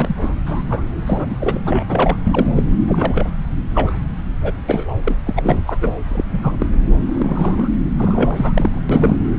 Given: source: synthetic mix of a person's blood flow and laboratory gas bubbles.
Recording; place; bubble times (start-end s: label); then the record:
Doppler ultrasound of blood flow; subclavian vein
0.00-0.34 s: bubbles
0.46-0.62 s: bubbles
0.67-0.84 s: bubbles
1.06-1.61 s: bubbles
1.65-2.17 s: bubbles
2.24-2.52 s: bubbles
2.56-2.63 s: bubbles
2.86-3.33 s: bubbles
3.74-3.99 s: bubbles
4.42-4.53 s: bubbles
4.69-4.96 s: bubbles
5.04-5.18 s: bubbles
5.25-5.63 s: bubbles
5.67-5.78 s: bubbles
5.81-5.94 s: bubbles
6.08-6.24 s: bubbles
6.32-6.56 s: bubbles
6.58-6.67 s: bubbles
7.08-7.70 s: bubbles
7.97-8.80 s: bubbles
8.89-9.17 s: bubbles
From the record:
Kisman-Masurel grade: 242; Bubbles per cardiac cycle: several, 3 to 8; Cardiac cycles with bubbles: 100%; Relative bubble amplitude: moderate (0.250 to 0.450); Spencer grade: 3 (all of the cardiac periods contain showers or single bubble signals, but not dominating or overriding the cardiac motion signals); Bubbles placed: anywhere in the cardiac cycle